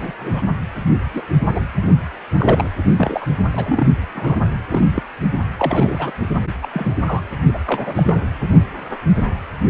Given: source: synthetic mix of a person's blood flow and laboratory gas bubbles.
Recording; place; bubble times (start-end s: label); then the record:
Doppler ultrasound of blood flow; precordium
0.00-0.12 s: bubbles
0.19-0.42 s: bubbles
1.13-1.22 s: bubbles
1.54-1.60 s: bubbles
1.82-1.89 s: bubbles
2.37-2.71 s: bubbles
2.97-3.27 s: bubbles
3.52-3.86 s: bubbles
4.15-4.37 s: bubbles
4.69-5.03 s: bubbles
5.58-6.12 s: bubbles
6.62-6.67 s: bubbles
6.73-7.00 s: bubbles
7.06-7.24 s: bubbles
7.54-7.58 s: bubbles
7.66-8.03 s: bubbles
8.06-8.26 s: bubbles
8.42-8.48 s: bubbles
From the record:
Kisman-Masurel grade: 232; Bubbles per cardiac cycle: several, 3 to 8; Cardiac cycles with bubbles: 50 to 99%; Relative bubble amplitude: moderate (0.250 to 0.450); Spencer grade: 3 (all of the cardiac periods contain showers or single bubble signals, but not dominating or overriding the cardiac motion signals); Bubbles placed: only in the low amplitude regions of the cardiac cycle